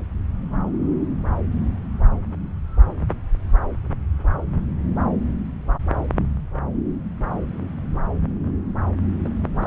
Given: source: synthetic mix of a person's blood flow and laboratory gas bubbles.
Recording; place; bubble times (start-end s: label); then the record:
Doppler ultrasound of blood flow; subclavian vein
9.25-9.29 s: bubbles
9.53-9.67 s: bubbles
From the record:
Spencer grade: 1 (occasional bubble signal discernible with the cardiac motion signal, with majority of cardiac periods free of bubbles); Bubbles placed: anywhere in the cardiac cycle